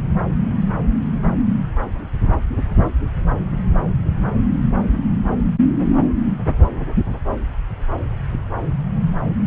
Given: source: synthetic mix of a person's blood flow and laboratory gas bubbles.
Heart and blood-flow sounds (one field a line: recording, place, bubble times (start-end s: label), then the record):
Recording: Doppler ultrasound of blood flow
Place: subclavian vein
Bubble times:
no bubbles
From the record:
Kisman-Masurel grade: 000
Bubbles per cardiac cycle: 0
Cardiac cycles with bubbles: 0%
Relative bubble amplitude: no bubbles discernible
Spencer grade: 0 (complete lack of bubble signals)